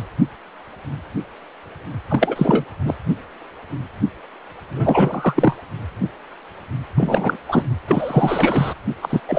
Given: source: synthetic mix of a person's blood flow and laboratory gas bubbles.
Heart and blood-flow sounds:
Doppler ultrasound of blood flow; precordium
0.00-0.04 s: bubbles
2.09-2.65 s: bubbles
2.85-2.95 s: bubbles
4.76-5.56 s: bubbles
6.97-7.37 s: bubbles
7.48-7.62 s: bubbles
7.87-8.73 s: bubbles
9.02-9.21 s: bubbles
9.28-9.39 s: bubbles
From the record:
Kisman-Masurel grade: 333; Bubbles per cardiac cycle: rolling drumbeat, 9 or more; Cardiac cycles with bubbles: 50 to 99%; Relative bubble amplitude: loud (0.450 to 0.775); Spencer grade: 3 (all of the cardiac periods contain showers or single bubble signals, but not dominating or overriding the cardiac motion signals); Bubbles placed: anywhere in the cardiac cycle

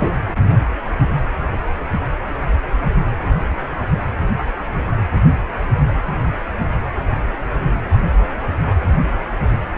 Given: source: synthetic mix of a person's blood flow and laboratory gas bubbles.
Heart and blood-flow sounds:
Doppler ultrasound of blood flow; precordium
0.00-0.12 s: bubbles
From the record:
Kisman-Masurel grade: 212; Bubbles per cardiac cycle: several, 3 to 8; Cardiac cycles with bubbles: 1 to 10%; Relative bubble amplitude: moderate (0.250 to 0.450); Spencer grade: 1 (occasional bubble signal discernible with the cardiac motion signal, with majority of cardiac periods free of bubbles); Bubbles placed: anywhere in the cardiac cycle

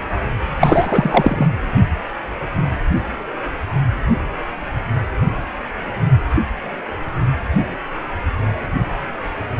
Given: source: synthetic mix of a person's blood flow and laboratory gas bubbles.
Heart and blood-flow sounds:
Doppler ultrasound of blood flow; precordium
0.60-1.47 s: bubbles
From the record:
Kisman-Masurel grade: 213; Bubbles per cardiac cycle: several, 3 to 8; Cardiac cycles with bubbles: 1 to 10%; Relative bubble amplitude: loud (0.450 to 0.775); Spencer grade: 1 (occasional bubble signal discernible with the cardiac motion signal, with majority of cardiac periods free of bubbles); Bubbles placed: anywhere in the cardiac cycle

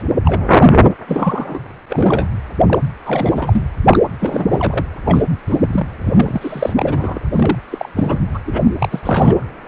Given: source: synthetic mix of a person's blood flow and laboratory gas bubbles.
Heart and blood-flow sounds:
Doppler ultrasound of blood flow; precordium
0.00-0.02 s: bubbles
0.25-0.47 s: bubbles
1.08-1.60 s: bubbles
1.90-2.27 s: bubbles
2.67-2.79 s: bubbles
3.06-3.64 s: bubbles
3.88-3.99 s: bubbles
4.19-4.86 s: bubbles
5.05-5.23 s: bubbles
5.47-5.88 s: bubbles
6.04-6.73 s: bubbles
6.76-7.20 s: bubbles
7.32-7.59 s: bubbles
7.70-7.89 s: bubbles
7.96-8.18 s: bubbles
8.34-8.39 s: bubbles
8.45-8.61 s: bubbles
8.79-9.45 s: bubbles
From the record:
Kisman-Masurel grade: 343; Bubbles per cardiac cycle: rolling drumbeat, 9 or more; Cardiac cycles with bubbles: 100%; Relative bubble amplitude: loud (0.450 to 0.775); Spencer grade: 3 (all of the cardiac periods contain showers or single bubble signals, but not dominating or overriding the cardiac motion signals); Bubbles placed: anywhere in the cardiac cycle

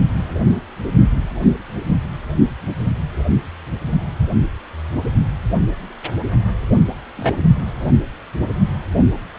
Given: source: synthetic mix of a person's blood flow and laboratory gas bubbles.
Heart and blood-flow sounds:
Doppler ultrasound of blood flow; precordium
7.17-7.32 s: bubbles
From the record:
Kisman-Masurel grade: 112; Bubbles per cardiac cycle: 1 to 2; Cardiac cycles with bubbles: 1 to 10%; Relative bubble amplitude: moderate (0.250 to 0.450); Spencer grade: 1 (occasional bubble signal discernible with the cardiac motion signal, with majority of cardiac periods free of bubbles); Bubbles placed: only in the low amplitude regions of the cardiac cycle

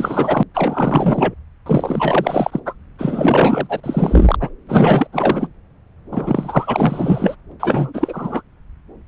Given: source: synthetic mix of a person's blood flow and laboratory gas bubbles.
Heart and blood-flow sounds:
Doppler ultrasound of blood flow; subclavian vein
0.00-0.43 s: bubbles
0.54-1.34 s: bubbles
1.66-2.60 s: bubbles
2.65-2.75 s: bubbles
2.98-4.36 s: bubbles
4.39-4.50 s: bubbles
4.68-5.07 s: bubbles
5.12-5.47 s: bubbles
6.11-7.35 s: bubbles
7.59-8.42 s: bubbles
From the record:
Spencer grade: 4 (maximum detectable bubble signal sounding continuously throughout systole and diastole of every cardiac period, and overriding the amplitude of the normal cardiac signals); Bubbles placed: anywhere in the cardiac cycle

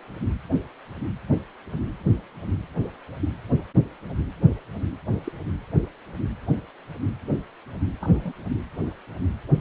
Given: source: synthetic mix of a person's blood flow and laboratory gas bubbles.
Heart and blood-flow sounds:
Doppler ultrasound of blood flow; precordium
5.24-5.32 s: bubbles
8.00-8.32 s: bubbles
From the record:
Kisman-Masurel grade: 121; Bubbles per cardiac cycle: 1 to 2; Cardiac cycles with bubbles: 10 to 50%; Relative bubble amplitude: barely perceptible (0.100 to 0.250); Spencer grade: 2 (many but less than half of the cardiac periods contain bubble signals, singularly or in groups); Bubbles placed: anywhere in the cardiac cycle

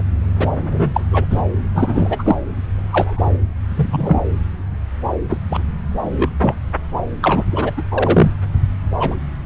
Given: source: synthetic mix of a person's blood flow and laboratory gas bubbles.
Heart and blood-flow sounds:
Doppler ultrasound of blood flow; subclavian vein
0.00-0.04 s: bubbles
0.39-0.47 s: bubbles
0.71-0.90 s: bubbles
0.93-1.00 s: bubbles
1.11-1.25 s: bubbles
1.30-1.42 s: bubbles
1.74-2.39 s: bubbles
2.90-3.21 s: bubbles
3.77-4.21 s: bubbles
5.29-5.40 s: bubbles
5.49-5.62 s: bubbles
6.02-6.29 s: bubbles
6.41-6.55 s: bubbles
7.22-7.44 s: bubbles
7.51-7.73 s: bubbles
7.77-7.83 s: bubbles
7.91-8.31 s: bubbles
8.99-9.16 s: bubbles
From the record:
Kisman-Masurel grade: 243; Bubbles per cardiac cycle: several, 3 to 8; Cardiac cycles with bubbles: 100%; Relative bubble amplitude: loud (0.450 to 0.775); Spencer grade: 3 (all of the cardiac periods contain showers or single bubble signals, but not dominating or overriding the cardiac motion signals); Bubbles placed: anywhere in the cardiac cycle

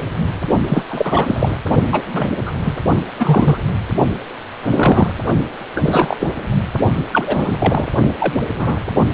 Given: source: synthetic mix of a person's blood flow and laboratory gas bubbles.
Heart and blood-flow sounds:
Doppler ultrasound of blood flow; precordium
0.66-0.83 s: bubbles
0.89-1.58 s: bubbles
1.92-2.02 s: bubbles
2.13-2.29 s: bubbles
2.46-2.50 s: bubbles
2.65-2.73 s: bubbles
3.16-3.60 s: bubbles
4.62-5.15 s: bubbles
5.75-6.27 s: bubbles
7.12-7.88 s: bubbles
8.19-8.33 s: bubbles
8.58-8.81 s: bubbles
9.12-9.14 s: bubbles
From the record:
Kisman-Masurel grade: 243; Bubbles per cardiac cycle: several, 3 to 8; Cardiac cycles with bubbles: 100%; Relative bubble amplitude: loud (0.450 to 0.775); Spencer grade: 3 (all of the cardiac periods contain showers or single bubble signals, but not dominating or overriding the cardiac motion signals); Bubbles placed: only in the low amplitude regions of the cardiac cycle

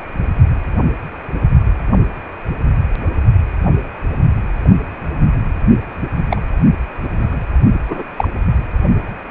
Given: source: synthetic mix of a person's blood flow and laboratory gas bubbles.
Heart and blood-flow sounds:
Doppler ultrasound of blood flow; precordium
6.30-6.42 s: bubbles
7.12-7.36 s: bubbles
7.89-8.03 s: bubbles
8.17-8.28 s: bubbles
From the record:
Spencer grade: 2 (many but less than half of the cardiac periods contain bubble signals, singularly or in groups); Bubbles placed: anywhere in the cardiac cycle

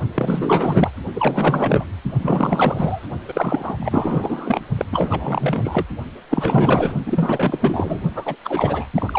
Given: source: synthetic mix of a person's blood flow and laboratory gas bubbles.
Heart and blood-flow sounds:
Doppler ultrasound of blood flow; precordium
0.14-0.91 s: bubbles
1.15-1.85 s: bubbles
2.22-3.07 s: bubbles
3.28-4.65 s: bubbles
4.78-4.85 s: bubbles
4.92-5.86 s: bubbles
6.30-6.94 s: bubbles
7.06-8.00 s: bubbles
8.14-8.35 s: bubbles
8.44-8.86 s: bubbles
8.94-9.19 s: bubbles
From the record:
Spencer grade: 4 (maximum detectable bubble signal sounding continuously throughout systole and diastole of every cardiac period, and overriding the amplitude of the normal cardiac signals); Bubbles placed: only in the low amplitude regions of the cardiac cycle

